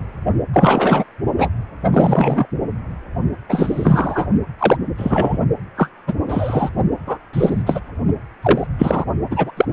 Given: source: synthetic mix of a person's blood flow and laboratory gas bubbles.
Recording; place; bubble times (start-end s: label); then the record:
Doppler ultrasound of blood flow; precordium
0.53-1.04 s: bubbles
1.38-1.49 s: bubbles
1.93-2.47 s: bubbles
3.49-4.26 s: bubbles
4.59-4.76 s: bubbles
4.97-5.37 s: bubbles
5.77-5.88 s: bubbles
6.07-6.13 s: bubbles
6.29-6.71 s: bubbles
7.06-7.18 s: bubbles
7.33-7.63 s: bubbles
7.66-7.80 s: bubbles
8.42-8.67 s: bubbles
8.79-9.04 s: bubbles
9.30-9.52 s: bubbles
9.56-9.65 s: bubbles
9.70-9.73 s: bubbles
From the record:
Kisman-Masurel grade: 243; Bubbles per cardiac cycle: several, 3 to 8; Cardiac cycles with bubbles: 100%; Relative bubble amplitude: loud (0.450 to 0.775); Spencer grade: 3 (all of the cardiac periods contain showers or single bubble signals, but not dominating or overriding the cardiac motion signals); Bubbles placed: only in the low amplitude regions of the cardiac cycle